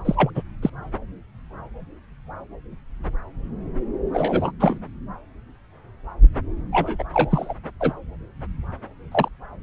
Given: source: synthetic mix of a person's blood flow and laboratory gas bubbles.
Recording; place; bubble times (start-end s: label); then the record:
Doppler ultrasound of blood flow; subclavian vein
0.04-0.31 s: bubbles
0.34-0.43 s: bubbles
0.61-0.70 s: bubbles
4.13-4.51 s: bubbles
4.59-4.78 s: bubbles
6.72-7.04 s: bubbles
7.13-7.54 s: bubbles
7.80-7.92 s: bubbles
9.12-9.28 s: bubbles
From the record:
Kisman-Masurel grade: 223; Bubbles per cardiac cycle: several, 3 to 8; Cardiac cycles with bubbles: 10 to 50%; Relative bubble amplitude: loud (0.450 to 0.775); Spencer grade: 2 (many but less than half of the cardiac periods contain bubble signals, singularly or in groups); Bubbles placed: anywhere in the cardiac cycle